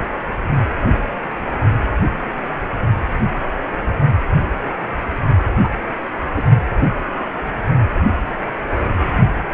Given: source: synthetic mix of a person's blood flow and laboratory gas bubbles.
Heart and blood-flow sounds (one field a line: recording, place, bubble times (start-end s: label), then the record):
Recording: Doppler ultrasound of blood flow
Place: precordium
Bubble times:
5.63-5.70 s: bubbles
6.36-6.44 s: bubbles
From the record:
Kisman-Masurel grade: 112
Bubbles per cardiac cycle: 1 to 2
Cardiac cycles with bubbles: 1 to 10%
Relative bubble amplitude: moderate (0.250 to 0.450)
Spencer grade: 1 (occasional bubble signal discernible with the cardiac motion signal, with majority of cardiac periods free of bubbles)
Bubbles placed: only in the low amplitude regions of the cardiac cycle